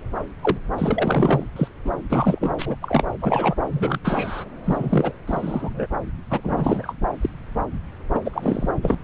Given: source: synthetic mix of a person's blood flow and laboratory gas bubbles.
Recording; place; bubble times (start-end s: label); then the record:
Doppler ultrasound of blood flow; subclavian vein
0.42-0.57 s: bubbles
0.78-1.46 s: bubbles
1.56-1.68 s: bubbles
1.84-1.91 s: bubbles
2.09-2.53 s: bubbles
2.58-2.75 s: bubbles
2.82-3.04 s: bubbles
3.20-3.54 s: bubbles
3.71-3.98 s: bubbles
4.04-4.44 s: bubbles
4.64-5.12 s: bubbles
5.27-5.87 s: bubbles
6.30-6.40 s: bubbles
6.43-6.94 s: bubbles
7.21-7.29 s: bubbles
8.14-8.20 s: bubbles
8.25-8.70 s: bubbles
8.82-8.95 s: bubbles
From the record:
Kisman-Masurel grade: 342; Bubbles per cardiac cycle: rolling drumbeat, 9 or more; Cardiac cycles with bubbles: 100%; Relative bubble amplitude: moderate (0.250 to 0.450); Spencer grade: 3 (all of the cardiac periods contain showers or single bubble signals, but not dominating or overriding the cardiac motion signals); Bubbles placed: anywhere in the cardiac cycle